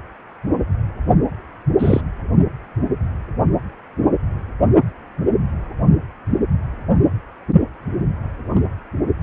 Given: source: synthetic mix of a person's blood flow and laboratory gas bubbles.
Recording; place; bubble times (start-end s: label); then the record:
Doppler ultrasound of blood flow; precordium
1.79-2.01 s: bubbles
8.55-8.61 s: bubbles
From the record:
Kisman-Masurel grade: 123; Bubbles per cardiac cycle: 1 to 2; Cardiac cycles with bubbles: 10 to 50%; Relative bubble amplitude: loud (0.450 to 0.775); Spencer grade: 2 (many but less than half of the cardiac periods contain bubble signals, singularly or in groups); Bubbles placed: only in the low amplitude regions of the cardiac cycle